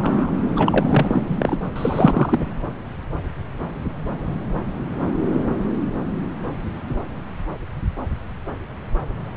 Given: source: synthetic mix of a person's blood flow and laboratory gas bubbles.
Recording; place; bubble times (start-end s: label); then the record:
Doppler ultrasound of blood flow; subclavian vein
0.00-0.31 s: bubbles
0.56-1.54 s: bubbles
1.76-2.39 s: bubbles
From the record:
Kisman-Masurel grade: 223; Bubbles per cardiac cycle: several, 3 to 8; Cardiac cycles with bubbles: 10 to 50%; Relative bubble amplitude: loud (0.450 to 0.775); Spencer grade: 2 (many but less than half of the cardiac periods contain bubble signals, singularly or in groups); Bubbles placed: anywhere in the cardiac cycle